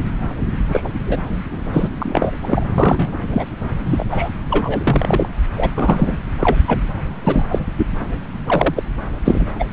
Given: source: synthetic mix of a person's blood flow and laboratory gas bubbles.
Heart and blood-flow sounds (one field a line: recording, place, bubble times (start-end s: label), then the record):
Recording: Doppler ultrasound of blood flow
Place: subclavian vein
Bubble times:
0.72-0.81 s: bubbles
0.84-0.90 s: bubbles
1.06-1.19 s: bubbles
1.72-1.88 s: bubbles
1.99-2.32 s: bubbles
2.42-2.65 s: bubbles
2.78-3.12 s: bubbles
3.30-3.46 s: bubbles
3.85-4.04 s: bubbles
4.12-4.29 s: bubbles
4.50-5.29 s: bubbles
5.57-5.71 s: bubbles
5.75-6.18 s: bubbles
6.40-6.56 s: bubbles
6.67-6.79 s: bubbles
7.24-7.44 s: bubbles
7.51-7.59 s: bubbles
7.77-7.87 s: bubbles
8.46-8.82 s: bubbles
9.24-9.46 s: bubbles
9.59-9.64 s: bubbles
From the record:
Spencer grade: 3 (all of the cardiac periods contain showers or single bubble signals, but not dominating or overriding the cardiac motion signals)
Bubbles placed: anywhere in the cardiac cycle